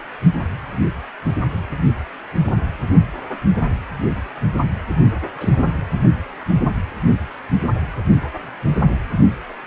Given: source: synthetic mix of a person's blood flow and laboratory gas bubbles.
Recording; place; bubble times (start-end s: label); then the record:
Doppler ultrasound of blood flow; precordium
0.62-0.77 s: bubbles
2.44-2.52 s: bubbles
5.35-5.66 s: bubbles
9.50-9.53 s: bubbles
From the record:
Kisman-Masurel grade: 121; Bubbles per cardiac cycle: 1 to 2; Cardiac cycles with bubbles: 10 to 50%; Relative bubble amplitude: barely perceptible (0.100 to 0.250); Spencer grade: 2 (many but less than half of the cardiac periods contain bubble signals, singularly or in groups); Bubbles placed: only in the low amplitude regions of the cardiac cycle